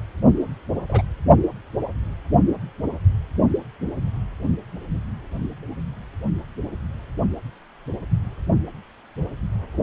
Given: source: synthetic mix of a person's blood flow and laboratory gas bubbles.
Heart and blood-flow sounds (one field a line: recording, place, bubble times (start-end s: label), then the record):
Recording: Doppler ultrasound of blood flow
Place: precordium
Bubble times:
0.88-1.02 s: bubbles
From the record:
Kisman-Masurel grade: 122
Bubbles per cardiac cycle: 1 to 2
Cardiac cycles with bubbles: 10 to 50%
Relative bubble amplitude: moderate (0.250 to 0.450)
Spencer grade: 2 (many but less than half of the cardiac periods contain bubble signals, singularly or in groups)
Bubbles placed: only in the low amplitude regions of the cardiac cycle